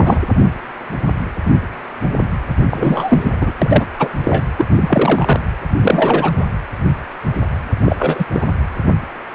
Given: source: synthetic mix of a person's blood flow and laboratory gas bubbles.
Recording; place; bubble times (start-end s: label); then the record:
Doppler ultrasound of blood flow; precordium
0.00-0.19 s: bubbles
2.70-3.37 s: bubbles
3.41-3.52 s: bubbles
3.62-3.86 s: bubbles
3.99-4.08 s: bubbles
4.24-4.44 s: bubbles
4.58-4.65 s: bubbles
4.76-5.40 s: bubbles
5.81-6.31 s: bubbles
6.40-6.45 s: bubbles
7.84-7.97 s: bubbles
8.00-8.24 s: bubbles
8.33-8.47 s: bubbles
From the record:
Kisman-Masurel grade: 233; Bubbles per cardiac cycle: several, 3 to 8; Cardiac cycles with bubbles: 50 to 99%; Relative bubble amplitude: loud (0.450 to 0.775); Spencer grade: 3 (all of the cardiac periods contain showers or single bubble signals, but not dominating or overriding the cardiac motion signals); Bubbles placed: anywhere in the cardiac cycle